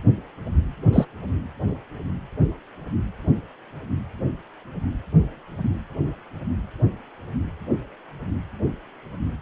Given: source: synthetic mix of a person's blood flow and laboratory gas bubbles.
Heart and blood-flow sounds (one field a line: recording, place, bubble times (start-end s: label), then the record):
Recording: Doppler ultrasound of blood flow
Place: precordium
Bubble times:
0.93-1.05 s: bubbles
From the record:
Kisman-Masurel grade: 113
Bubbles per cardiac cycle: 1 to 2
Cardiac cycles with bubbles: 1 to 10%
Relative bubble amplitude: loud (0.450 to 0.775)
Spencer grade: 1 (occasional bubble signal discernible with the cardiac motion signal, with majority of cardiac periods free of bubbles)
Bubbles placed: only in the low amplitude regions of the cardiac cycle